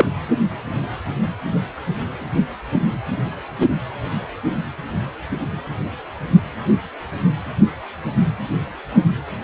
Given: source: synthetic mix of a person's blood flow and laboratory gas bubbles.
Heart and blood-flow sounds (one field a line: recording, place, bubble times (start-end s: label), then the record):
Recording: Doppler ultrasound of blood flow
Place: precordium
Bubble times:
0.00-0.05 s: bubbles
From the record:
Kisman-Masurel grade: 213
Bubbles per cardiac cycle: several, 3 to 8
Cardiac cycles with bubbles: 1 to 10%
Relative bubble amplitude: loud (0.450 to 0.775)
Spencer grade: 1 (occasional bubble signal discernible with the cardiac motion signal, with majority of cardiac periods free of bubbles)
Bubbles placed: anywhere in the cardiac cycle